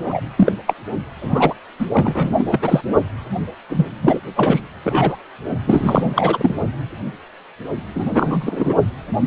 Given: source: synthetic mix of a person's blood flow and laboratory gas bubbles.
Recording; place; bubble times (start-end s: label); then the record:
Doppler ultrasound of blood flow; precordium
0.08-0.21 s: bubbles
0.37-0.51 s: bubbles
0.67-0.74 s: bubbles
1.21-1.54 s: bubbles
1.79-1.86 s: bubbles
1.93-2.44 s: bubbles
2.50-2.81 s: bubbles
3.70-3.85 s: bubbles
4.03-4.20 s: bubbles
4.36-4.61 s: bubbles
4.84-5.17 s: bubbles
5.67-6.55 s: bubbles
7.94-8.74 s: bubbles
From the record:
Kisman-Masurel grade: 233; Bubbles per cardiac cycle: several, 3 to 8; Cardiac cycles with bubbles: 50 to 99%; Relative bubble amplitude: loud (0.450 to 0.775); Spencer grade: 3 (all of the cardiac periods contain showers or single bubble signals, but not dominating or overriding the cardiac motion signals); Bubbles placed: only in the low amplitude regions of the cardiac cycle